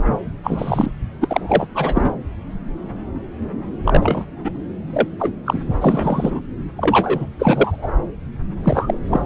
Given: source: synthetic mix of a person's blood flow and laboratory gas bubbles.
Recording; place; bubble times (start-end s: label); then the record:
Doppler ultrasound of blood flow; subclavian vein
0.43-0.95 s: bubbles
1.21-1.68 s: bubbles
1.75-2.13 s: bubbles
3.85-4.25 s: bubbles
4.44-4.51 s: bubbles
4.92-5.07 s: bubbles
5.19-5.33 s: bubbles
5.46-5.59 s: bubbles
5.80-6.41 s: bubbles
6.76-7.26 s: bubbles
7.39-7.88 s: bubbles
8.64-8.99 s: bubbles
9.08-9.26 s: bubbles
From the record:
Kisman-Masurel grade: 233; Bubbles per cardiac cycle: several, 3 to 8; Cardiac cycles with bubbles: 50 to 99%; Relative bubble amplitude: loud (0.450 to 0.775); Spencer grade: 3 (all of the cardiac periods contain showers or single bubble signals, but not dominating or overriding the cardiac motion signals); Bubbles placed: anywhere in the cardiac cycle